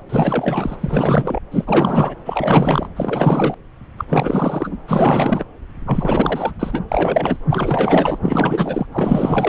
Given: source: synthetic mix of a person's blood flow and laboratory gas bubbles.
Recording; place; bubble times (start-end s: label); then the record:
Doppler ultrasound of blood flow; subclavian vein
0.09-1.40 s: bubbles
1.51-2.15 s: bubbles
2.25-2.88 s: bubbles
2.96-3.54 s: bubbles
3.97-4.05 s: bubbles
4.08-4.77 s: bubbles
4.87-5.44 s: bubbles
5.86-6.51 s: bubbles
6.59-6.79 s: bubbles
6.88-7.37 s: bubbles
7.50-8.18 s: bubbles
8.22-8.87 s: bubbles
8.93-9.49 s: bubbles
From the record:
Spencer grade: 4 (maximum detectable bubble signal sounding continuously throughout systole and diastole of every cardiac period, and overriding the amplitude of the normal cardiac signals); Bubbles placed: anywhere in the cardiac cycle